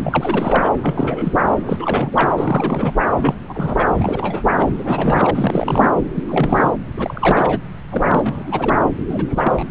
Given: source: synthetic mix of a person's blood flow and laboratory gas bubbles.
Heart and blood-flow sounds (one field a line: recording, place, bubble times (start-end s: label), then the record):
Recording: Doppler ultrasound of blood flow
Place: subclavian vein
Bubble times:
0.04-0.72 s: bubbles
0.82-1.32 s: bubbles
1.67-2.95 s: bubbles
3.15-3.86 s: bubbles
3.98-4.43 s: bubbles
4.57-4.71 s: bubbles
4.78-5.31 s: bubbles
5.33-5.90 s: bubbles
6.15-6.71 s: bubbles
6.96-7.59 s: bubbles
7.88-8.79 s: bubbles
9.10-9.63 s: bubbles
From the record:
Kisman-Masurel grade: 342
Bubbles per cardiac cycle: rolling drumbeat, 9 or more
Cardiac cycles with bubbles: 100%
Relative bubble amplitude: moderate (0.250 to 0.450)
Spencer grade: 3 (all of the cardiac periods contain showers or single bubble signals, but not dominating or overriding the cardiac motion signals)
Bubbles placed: anywhere in the cardiac cycle